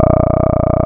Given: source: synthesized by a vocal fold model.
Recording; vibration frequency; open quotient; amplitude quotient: sustained vowel; 30 Hz; 0.2; 1.3